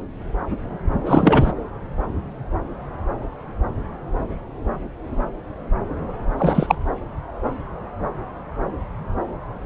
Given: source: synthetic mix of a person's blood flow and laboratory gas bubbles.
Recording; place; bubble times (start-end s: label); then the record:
Doppler ultrasound of blood flow; subclavian vein
1.05-1.52 s: bubbles
6.38-6.77 s: bubbles
From the record:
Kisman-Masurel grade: 213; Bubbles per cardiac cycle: several, 3 to 8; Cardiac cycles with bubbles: 1 to 10%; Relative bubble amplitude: loud (0.450 to 0.775); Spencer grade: 1 (occasional bubble signal discernible with the cardiac motion signal, with majority of cardiac periods free of bubbles); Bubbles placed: anywhere in the cardiac cycle